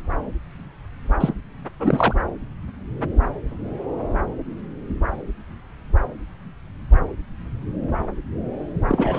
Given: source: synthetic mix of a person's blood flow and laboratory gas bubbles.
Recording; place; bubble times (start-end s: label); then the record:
Doppler ultrasound of blood flow; subclavian vein
1.20-1.33 s: bubbles
1.79-2.15 s: bubbles
8.88-9.19 s: bubbles
From the record:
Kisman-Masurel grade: 222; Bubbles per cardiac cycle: several, 3 to 8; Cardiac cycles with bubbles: 10 to 50%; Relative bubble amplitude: moderate (0.250 to 0.450); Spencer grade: 2 (many but less than half of the cardiac periods contain bubble signals, singularly or in groups); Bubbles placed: anywhere in the cardiac cycle